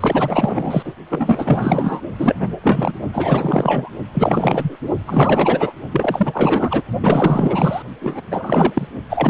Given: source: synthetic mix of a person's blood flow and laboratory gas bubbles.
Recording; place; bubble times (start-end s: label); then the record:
Doppler ultrasound of blood flow; precordium
0.00-0.94 s: bubbles
1.09-2.00 s: bubbles
2.18-2.35 s: bubbles
2.40-2.49 s: bubbles
2.62-2.93 s: bubbles
3.13-3.90 s: bubbles
4.13-4.76 s: bubbles
5.06-5.72 s: bubbles
5.91-6.83 s: bubbles
7.02-7.83 s: bubbles
8.01-8.21 s: bubbles
8.31-8.88 s: bubbles
9.09-9.30 s: bubbles
From the record:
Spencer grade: 4 (maximum detectable bubble signal sounding continuously throughout systole and diastole of every cardiac period, and overriding the amplitude of the normal cardiac signals); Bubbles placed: only in the low amplitude regions of the cardiac cycle